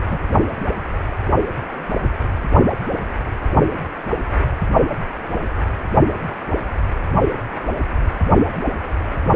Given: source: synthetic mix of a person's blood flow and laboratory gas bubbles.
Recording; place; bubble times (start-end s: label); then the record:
Doppler ultrasound of blood flow; precordium
0.00-0.18 s: bubbles
From the record:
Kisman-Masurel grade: 112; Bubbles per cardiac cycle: 1 to 2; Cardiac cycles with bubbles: 1 to 10%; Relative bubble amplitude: moderate (0.250 to 0.450); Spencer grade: 1 (occasional bubble signal discernible with the cardiac motion signal, with majority of cardiac periods free of bubbles); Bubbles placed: only in the low amplitude regions of the cardiac cycle